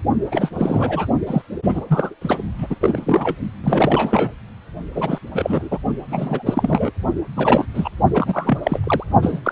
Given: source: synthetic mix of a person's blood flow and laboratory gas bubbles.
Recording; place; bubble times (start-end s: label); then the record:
Doppler ultrasound of blood flow; precordium
0.32-0.50 s: bubbles
0.58-1.06 s: bubbles
1.26-1.42 s: bubbles
1.62-1.85 s: bubbles
1.89-2.14 s: bubbles
2.21-2.38 s: bubbles
2.58-2.67 s: bubbles
2.70-2.75 s: bubbles
2.80-3.35 s: bubbles
3.63-4.32 s: bubbles
4.95-5.19 s: bubbles
5.33-5.78 s: bubbles
6.10-6.43 s: bubbles
6.46-6.92 s: bubbles
7.36-7.66 s: bubbles
7.74-7.90 s: bubbles
8.13-8.58 s: bubbles
8.63-8.79 s: bubbles
8.84-9.04 s: bubbles
9.22-9.39 s: bubbles
9.45-9.52 s: bubbles
From the record:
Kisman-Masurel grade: 342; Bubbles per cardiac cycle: rolling drumbeat, 9 or more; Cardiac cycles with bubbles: 100%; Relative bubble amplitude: moderate (0.250 to 0.450); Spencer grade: 3 (all of the cardiac periods contain showers or single bubble signals, but not dominating or overriding the cardiac motion signals); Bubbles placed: only in the low amplitude regions of the cardiac cycle